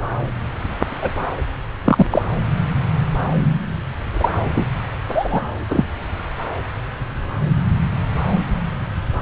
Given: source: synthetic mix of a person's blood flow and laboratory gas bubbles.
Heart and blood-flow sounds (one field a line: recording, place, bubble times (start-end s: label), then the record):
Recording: Doppler ultrasound of blood flow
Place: subclavian vein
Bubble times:
1.01-1.11 s: bubbles
1.84-2.06 s: bubbles
2.10-2.22 s: bubbles
4.13-4.30 s: bubbles
4.54-4.67 s: bubbles
5.08-5.41 s: bubbles
5.70-5.85 s: bubbles
From the record:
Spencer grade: 2 (many but less than half of the cardiac periods contain bubble signals, singularly or in groups)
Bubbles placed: anywhere in the cardiac cycle